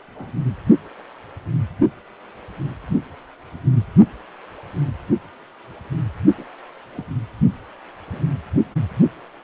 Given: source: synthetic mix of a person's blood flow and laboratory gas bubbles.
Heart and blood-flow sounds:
Doppler ultrasound of blood flow; precordium
0.08-0.10 s: bubbles
0.15-0.32 s: bubbles
6.37-6.45 s: bubbles
6.95-7.05 s: bubbles
8.06-8.22 s: bubbles
8.28-8.37 s: bubbles
From the record:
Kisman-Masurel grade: 121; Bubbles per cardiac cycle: 1 to 2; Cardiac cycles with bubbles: 10 to 50%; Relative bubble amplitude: barely perceptible (0.100 to 0.250); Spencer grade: 2 (many but less than half of the cardiac periods contain bubble signals, singularly or in groups); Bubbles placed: only in the low amplitude regions of the cardiac cycle

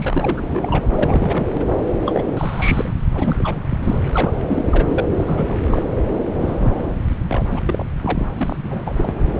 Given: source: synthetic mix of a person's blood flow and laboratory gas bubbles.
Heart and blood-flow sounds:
Doppler ultrasound of blood flow; subclavian vein
0.00-0.41 s: bubbles
0.47-0.85 s: bubbles
0.93-1.76 s: bubbles
2.06-2.30 s: bubbles
2.37-2.93 s: bubbles
3.15-3.66 s: bubbles
3.69-3.98 s: bubbles
4.12-4.33 s: bubbles
4.46-5.08 s: bubbles
5.12-5.58 s: bubbles
5.64-5.83 s: bubbles
6.41-6.71 s: bubbles
6.76-6.95 s: bubbles
7.29-7.62 s: bubbles
7.65-7.86 s: bubbles
8.01-8.27 s: bubbles
8.35-8.57 s: bubbles
8.63-9.15 s: bubbles
From the record:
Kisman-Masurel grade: 342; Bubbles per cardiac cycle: rolling drumbeat, 9 or more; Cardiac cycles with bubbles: 100%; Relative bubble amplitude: moderate (0.250 to 0.450); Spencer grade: 3 (all of the cardiac periods contain showers or single bubble signals, but not dominating or overriding the cardiac motion signals); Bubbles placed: anywhere in the cardiac cycle

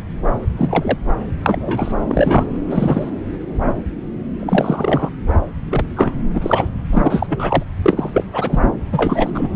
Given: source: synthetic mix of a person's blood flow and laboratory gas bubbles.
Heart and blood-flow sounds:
Doppler ultrasound of blood flow; subclavian vein
0.57-0.97 s: bubbles
1.46-1.92 s: bubbles
2.08-2.46 s: bubbles
2.67-3.10 s: bubbles
4.40-5.10 s: bubbles
5.70-5.85 s: bubbles
5.96-6.12 s: bubbles
6.35-6.70 s: bubbles
6.93-7.64 s: bubbles
7.83-8.25 s: bubbles
8.32-8.62 s: bubbles
8.92-9.30 s: bubbles
9.34-9.50 s: bubbles
9.53-9.56 s: bubbles
From the record:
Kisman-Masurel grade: 233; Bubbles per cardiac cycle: several, 3 to 8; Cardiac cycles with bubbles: 50 to 99%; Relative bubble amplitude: loud (0.450 to 0.775); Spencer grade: 3 (all of the cardiac periods contain showers or single bubble signals, but not dominating or overriding the cardiac motion signals); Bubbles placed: anywhere in the cardiac cycle

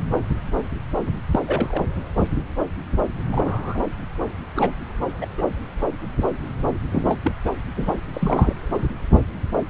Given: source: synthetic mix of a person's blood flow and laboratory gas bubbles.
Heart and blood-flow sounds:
Doppler ultrasound of blood flow; subclavian vein
1.31-1.82 s: bubbles
3.33-3.81 s: bubbles
4.55-4.71 s: bubbles
5.21-5.26 s: bubbles
5.38-5.43 s: bubbles
6.92-7.18 s: bubbles
7.24-7.31 s: bubbles
7.46-7.50 s: bubbles
7.76-7.91 s: bubbles
8.13-8.54 s: bubbles
From the record:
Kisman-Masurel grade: 232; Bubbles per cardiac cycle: several, 3 to 8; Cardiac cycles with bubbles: 50 to 99%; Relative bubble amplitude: moderate (0.250 to 0.450); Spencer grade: 3 (all of the cardiac periods contain showers or single bubble signals, but not dominating or overriding the cardiac motion signals); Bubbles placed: anywhere in the cardiac cycle

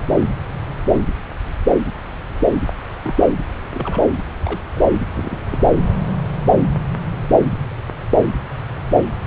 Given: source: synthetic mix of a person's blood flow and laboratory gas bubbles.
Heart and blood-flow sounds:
Doppler ultrasound of blood flow; subclavian vein
3.02-3.15 s: bubbles
3.73-4.01 s: bubbles
4.44-4.65 s: bubbles
4.75-4.81 s: bubbles
5.13-5.39 s: bubbles
5.50-5.58 s: bubbles
8.13-8.30 s: bubbles
From the record:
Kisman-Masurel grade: 121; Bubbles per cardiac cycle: 1 to 2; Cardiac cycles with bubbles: 10 to 50%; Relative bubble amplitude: barely perceptible (0.100 to 0.250); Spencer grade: 2 (many but less than half of the cardiac periods contain bubble signals, singularly or in groups); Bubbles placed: anywhere in the cardiac cycle

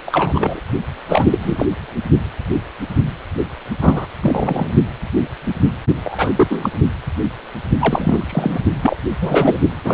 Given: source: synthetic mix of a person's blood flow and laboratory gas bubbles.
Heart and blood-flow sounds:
Doppler ultrasound of blood flow; precordium
0.05-0.60 s: bubbles
1.08-1.66 s: bubbles
3.81-4.07 s: bubbles
4.22-4.71 s: bubbles
6.04-6.31 s: bubbles
6.36-6.70 s: bubbles
7.79-8.59 s: bubbles
8.82-8.97 s: bubbles
9.21-9.57 s: bubbles
9.84-9.94 s: bubbles
From the record:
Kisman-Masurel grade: 233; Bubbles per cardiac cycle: several, 3 to 8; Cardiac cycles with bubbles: 50 to 99%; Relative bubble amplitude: loud (0.450 to 0.775); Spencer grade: 3 (all of the cardiac periods contain showers or single bubble signals, but not dominating or overriding the cardiac motion signals); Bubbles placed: only in the low amplitude regions of the cardiac cycle

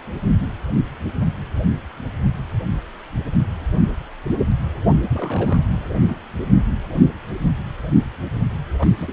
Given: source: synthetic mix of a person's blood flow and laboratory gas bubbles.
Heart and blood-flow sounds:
Doppler ultrasound of blood flow; precordium
5.12-5.63 s: bubbles
8.79-8.90 s: bubbles
8.97-9.13 s: bubbles
From the record:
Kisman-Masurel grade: 221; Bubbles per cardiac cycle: several, 3 to 8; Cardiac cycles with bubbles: 10 to 50%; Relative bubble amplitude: barely perceptible (0.100 to 0.250); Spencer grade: 2 (many but less than half of the cardiac periods contain bubble signals, singularly or in groups); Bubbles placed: anywhere in the cardiac cycle

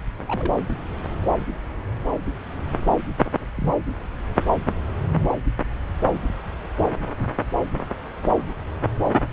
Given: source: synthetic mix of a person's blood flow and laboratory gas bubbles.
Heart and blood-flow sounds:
Doppler ultrasound of blood flow; subclavian vein
0.27-0.54 s: bubbles
3.56-3.75 s: bubbles
From the record:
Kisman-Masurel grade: 121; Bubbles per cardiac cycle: 1 to 2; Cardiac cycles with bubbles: 10 to 50%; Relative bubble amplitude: barely perceptible (0.100 to 0.250); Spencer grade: 2 (many but less than half of the cardiac periods contain bubble signals, singularly or in groups); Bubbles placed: anywhere in the cardiac cycle

